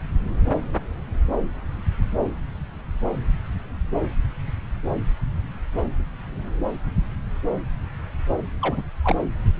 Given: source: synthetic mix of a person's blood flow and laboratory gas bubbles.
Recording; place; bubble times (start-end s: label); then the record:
Doppler ultrasound of blood flow; subclavian vein
8.62-8.83 s: bubbles
9.04-9.17 s: bubbles
From the record:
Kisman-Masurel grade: 211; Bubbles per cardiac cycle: several, 3 to 8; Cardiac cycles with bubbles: 1 to 10%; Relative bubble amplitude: barely perceptible (0.100 to 0.250); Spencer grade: 1 (occasional bubble signal discernible with the cardiac motion signal, with majority of cardiac periods free of bubbles); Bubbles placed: anywhere in the cardiac cycle